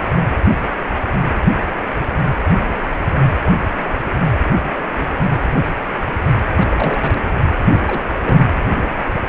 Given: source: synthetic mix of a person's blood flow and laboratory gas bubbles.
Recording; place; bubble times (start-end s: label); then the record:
Doppler ultrasound of blood flow; precordium
6.61-7.20 s: bubbles
7.59-7.83 s: bubbles
7.87-8.00 s: bubbles
8.22-8.48 s: bubbles
From the record:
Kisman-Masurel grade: 222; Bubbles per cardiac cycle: several, 3 to 8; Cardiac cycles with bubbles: 10 to 50%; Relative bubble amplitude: moderate (0.250 to 0.450); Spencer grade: 2 (many but less than half of the cardiac periods contain bubble signals, singularly or in groups); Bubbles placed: anywhere in the cardiac cycle